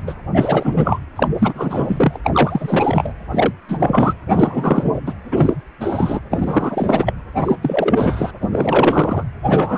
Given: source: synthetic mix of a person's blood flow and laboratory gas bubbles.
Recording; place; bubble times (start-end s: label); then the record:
Doppler ultrasound of blood flow; precordium
0.07-0.13 s: bubbles
0.33-0.99 s: bubbles
1.16-1.28 s: bubbles
1.39-2.19 s: bubbles
2.23-3.13 s: bubbles
3.31-3.52 s: bubbles
3.68-4.13 s: bubbles
4.29-4.92 s: bubbles
5.06-5.13 s: bubbles
5.31-5.54 s: bubbles
5.80-6.20 s: bubbles
6.31-7.13 s: bubbles
7.39-7.55 s: bubbles
7.62-8.31 s: bubbles
8.41-9.23 s: bubbles
9.47-9.78 s: bubbles
From the record:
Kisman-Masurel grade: 343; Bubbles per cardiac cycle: rolling drumbeat, 9 or more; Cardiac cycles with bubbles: 100%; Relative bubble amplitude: loud (0.450 to 0.775); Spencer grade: 3 (all of the cardiac periods contain showers or single bubble signals, but not dominating or overriding the cardiac motion signals); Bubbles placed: anywhere in the cardiac cycle